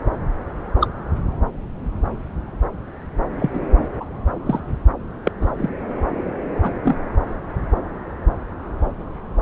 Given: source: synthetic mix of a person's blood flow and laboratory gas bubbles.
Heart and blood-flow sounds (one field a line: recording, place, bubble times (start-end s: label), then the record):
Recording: Doppler ultrasound of blood flow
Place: subclavian vein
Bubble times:
0.80-0.88 s: bubbles
3.40-3.50 s: bubbles
3.54-3.60 s: bubbles
4.00-4.04 s: bubbles
4.46-4.60 s: bubbles
5.25-5.32 s: bubbles
5.41-5.50 s: bubbles
5.58-5.69 s: bubbles
6.62-6.73 s: bubbles
6.84-6.98 s: bubbles
From the record:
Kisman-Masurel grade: 122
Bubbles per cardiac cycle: 1 to 2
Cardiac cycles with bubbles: 10 to 50%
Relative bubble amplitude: moderate (0.250 to 0.450)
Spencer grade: 2 (many but less than half of the cardiac periods contain bubble signals, singularly or in groups)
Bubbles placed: anywhere in the cardiac cycle